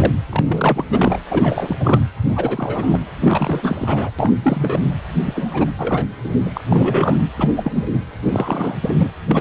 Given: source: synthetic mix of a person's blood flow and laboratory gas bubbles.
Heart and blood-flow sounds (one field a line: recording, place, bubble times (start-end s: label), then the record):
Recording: Doppler ultrasound of blood flow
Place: precordium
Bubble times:
0.00-0.13 s: bubbles
0.29-0.85 s: bubbles
0.90-1.20 s: bubbles
1.31-1.76 s: bubbles
1.79-2.00 s: bubbles
2.25-3.00 s: bubbles
3.21-4.10 s: bubbles
4.18-4.33 s: bubbles
4.42-4.89 s: bubbles
5.23-5.70 s: bubbles
5.78-6.08 s: bubbles
6.24-6.30 s: bubbles
6.46-6.64 s: bubbles
6.70-7.17 s: bubbles
7.38-7.71 s: bubbles
7.75-7.91 s: bubbles
7.94-7.99 s: bubbles
8.27-8.76 s: bubbles
8.81-9.08 s: bubbles
9.28-9.41 s: bubbles
From the record:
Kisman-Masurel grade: 342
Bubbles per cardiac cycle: rolling drumbeat, 9 or more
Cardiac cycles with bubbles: 100%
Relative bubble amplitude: moderate (0.250 to 0.450)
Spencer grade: 3 (all of the cardiac periods contain showers or single bubble signals, but not dominating or overriding the cardiac motion signals)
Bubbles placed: anywhere in the cardiac cycle